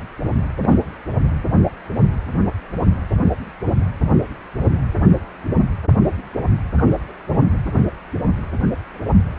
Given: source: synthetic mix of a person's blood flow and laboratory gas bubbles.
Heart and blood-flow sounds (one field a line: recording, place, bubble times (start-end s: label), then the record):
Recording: Doppler ultrasound of blood flow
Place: precordium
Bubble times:
0.62-0.77 s: bubbles
3.65-3.78 s: bubbles
6.78-6.83 s: bubbles
6.86-6.98 s: bubbles
From the record:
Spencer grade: 2 (many but less than half of the cardiac periods contain bubble signals, singularly or in groups)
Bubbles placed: anywhere in the cardiac cycle